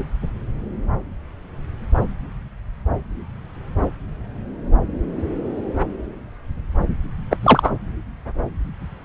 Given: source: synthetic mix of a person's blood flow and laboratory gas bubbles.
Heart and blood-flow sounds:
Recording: Doppler ultrasound of blood flow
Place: subclavian vein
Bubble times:
7.30-7.37 s: bubbles
7.42-7.71 s: bubbles
From the record:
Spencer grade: 1 (occasional bubble signal discernible with the cardiac motion signal, with majority of cardiac periods free of bubbles)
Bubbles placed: anywhere in the cardiac cycle

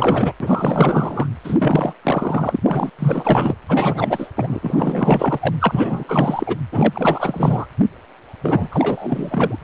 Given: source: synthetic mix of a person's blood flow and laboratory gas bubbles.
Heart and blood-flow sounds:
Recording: Doppler ultrasound of blood flow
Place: precordium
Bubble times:
0.00-0.33 s: bubbles
0.40-1.27 s: bubbles
1.43-1.94 s: bubbles
2.03-2.60 s: bubbles
2.63-2.90 s: bubbles
2.99-3.54 s: bubbles
3.69-4.28 s: bubbles
4.36-5.55 s: bubbles
5.59-6.57 s: bubbles
6.72-7.66 s: bubbles
8.43-8.68 s: bubbles
8.71-9.59 s: bubbles
From the record:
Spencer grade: 4 (maximum detectable bubble signal sounding continuously throughout systole and diastole of every cardiac period, and overriding the amplitude of the normal cardiac signals)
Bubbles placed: anywhere in the cardiac cycle

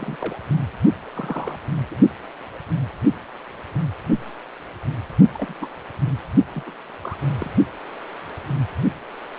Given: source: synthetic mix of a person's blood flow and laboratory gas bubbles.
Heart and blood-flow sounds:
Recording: Doppler ultrasound of blood flow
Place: precordium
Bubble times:
0.00-0.16 s: bubbles
0.20-0.38 s: bubbles
1.14-1.59 s: bubbles
1.90-1.95 s: bubbles
5.34-5.54 s: bubbles
5.60-5.71 s: bubbles
6.55-6.63 s: bubbles
6.66-6.74 s: bubbles
7.01-7.17 s: bubbles
7.40-7.53 s: bubbles
From the record:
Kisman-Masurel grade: 221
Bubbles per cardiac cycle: several, 3 to 8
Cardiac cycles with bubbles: 10 to 50%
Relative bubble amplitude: barely perceptible (0.100 to 0.250)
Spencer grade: 2 (many but less than half of the cardiac periods contain bubble signals, singularly or in groups)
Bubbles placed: only in the low amplitude regions of the cardiac cycle

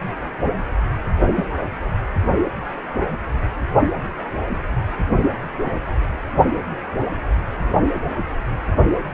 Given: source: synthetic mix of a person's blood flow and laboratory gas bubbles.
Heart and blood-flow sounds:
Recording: Doppler ultrasound of blood flow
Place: precordium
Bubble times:
1.35-1.49 s: bubbles
From the record:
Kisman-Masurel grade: 122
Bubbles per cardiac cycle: 1 to 2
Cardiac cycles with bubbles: 10 to 50%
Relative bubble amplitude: moderate (0.250 to 0.450)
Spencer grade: 2 (many but less than half of the cardiac periods contain bubble signals, singularly or in groups)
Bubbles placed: only in the low amplitude regions of the cardiac cycle

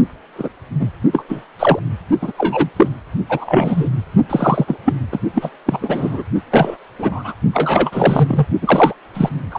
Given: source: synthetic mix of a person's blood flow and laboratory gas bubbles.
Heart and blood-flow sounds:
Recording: Doppler ultrasound of blood flow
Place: precordium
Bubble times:
0.38-0.49 s: bubbles
0.79-0.89 s: bubbles
1.12-1.24 s: bubbles
1.29-1.44 s: bubbles
1.59-1.79 s: bubbles
2.21-2.32 s: bubbles
2.38-2.69 s: bubbles
2.76-2.92 s: bubbles
3.29-3.89 s: bubbles
4.29-4.65 s: bubbles
4.67-4.77 s: bubbles
4.85-4.93 s: bubbles
5.12-5.19 s: bubbles
5.33-5.50 s: bubbles
5.66-6.24 s: bubbles
6.50-6.76 s: bubbles
6.99-7.34 s: bubbles
7.53-8.46 s: bubbles
8.62-8.94 s: bubbles
9.14-9.29 s: bubbles
9.50-9.59 s: bubbles
From the record:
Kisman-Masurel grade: 243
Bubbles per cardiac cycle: several, 3 to 8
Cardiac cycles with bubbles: 100%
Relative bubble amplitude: loud (0.450 to 0.775)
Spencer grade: 3 (all of the cardiac periods contain showers or single bubble signals, but not dominating or overriding the cardiac motion signals)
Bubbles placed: only in the low amplitude regions of the cardiac cycle

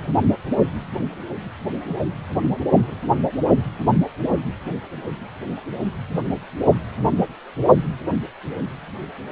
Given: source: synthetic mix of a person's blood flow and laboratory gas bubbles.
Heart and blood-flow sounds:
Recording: Doppler ultrasound of blood flow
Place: precordium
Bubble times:
1.89-1.94 s: bubbles
2.84-3.00 s: bubbles
From the record:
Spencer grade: 1 (occasional bubble signal discernible with the cardiac motion signal, with majority of cardiac periods free of bubbles)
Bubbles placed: only in the low amplitude regions of the cardiac cycle

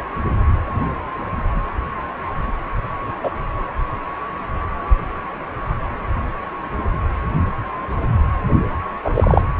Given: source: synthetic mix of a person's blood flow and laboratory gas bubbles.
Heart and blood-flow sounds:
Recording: Doppler ultrasound of blood flow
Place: precordium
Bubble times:
3.23-3.30 s: bubbles
9.04-9.11 s: bubbles
9.14-9.42 s: bubbles
From the record:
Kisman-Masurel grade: 123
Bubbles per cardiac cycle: 1 to 2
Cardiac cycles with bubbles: 10 to 50%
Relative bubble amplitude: loud (0.450 to 0.775)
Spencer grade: 2 (many but less than half of the cardiac periods contain bubble signals, singularly or in groups)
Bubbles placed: anywhere in the cardiac cycle

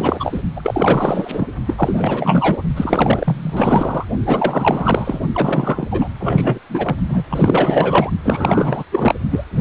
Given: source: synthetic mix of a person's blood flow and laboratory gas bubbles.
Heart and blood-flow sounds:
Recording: Doppler ultrasound of blood flow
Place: precordium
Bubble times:
0.00-0.41 s: bubbles
0.56-1.48 s: bubbles
1.65-1.74 s: bubbles
1.77-2.62 s: bubbles
2.76-4.05 s: bubbles
4.25-5.21 s: bubbles
5.33-5.87 s: bubbles
5.91-6.09 s: bubbles
6.19-6.59 s: bubbles
6.69-6.97 s: bubbles
7.08-7.23 s: bubbles
7.29-8.10 s: bubbles
8.23-8.84 s: bubbles
8.91-9.14 s: bubbles
9.30-9.44 s: bubbles
9.52-9.61 s: bubbles
From the record:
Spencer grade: 4 (maximum detectable bubble signal sounding continuously throughout systole and diastole of every cardiac period, and overriding the amplitude of the normal cardiac signals)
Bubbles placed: only in the low amplitude regions of the cardiac cycle

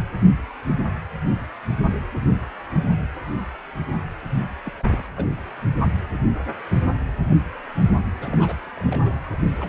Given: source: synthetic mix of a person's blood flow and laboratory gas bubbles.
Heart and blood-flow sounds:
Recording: Doppler ultrasound of blood flow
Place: precordium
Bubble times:
4.65-4.71 s: bubbles
4.80-4.83 s: bubbles
4.90-5.09 s: bubbles
5.16-5.28 s: bubbles
8.21-8.60 s: bubbles
8.63-8.71 s: bubbles
8.76-9.12 s: bubbles
9.61-9.68 s: bubbles
From the record:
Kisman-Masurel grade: 221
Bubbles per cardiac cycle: several, 3 to 8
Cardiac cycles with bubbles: 10 to 50%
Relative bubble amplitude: barely perceptible (0.100 to 0.250)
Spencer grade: 2 (many but less than half of the cardiac periods contain bubble signals, singularly or in groups)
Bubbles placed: anywhere in the cardiac cycle

